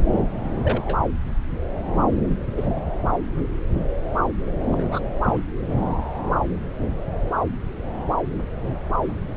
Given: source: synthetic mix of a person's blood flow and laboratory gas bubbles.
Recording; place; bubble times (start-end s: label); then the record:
Doppler ultrasound of blood flow; subclavian vein
0.63-0.96 s: bubbles
2.56-2.69 s: bubbles
4.72-5.00 s: bubbles
5.23-5.41 s: bubbles
From the record:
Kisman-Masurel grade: 122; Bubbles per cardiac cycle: 1 to 2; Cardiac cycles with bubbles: 10 to 50%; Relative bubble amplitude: moderate (0.250 to 0.450); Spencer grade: 2 (many but less than half of the cardiac periods contain bubble signals, singularly or in groups); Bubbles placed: anywhere in the cardiac cycle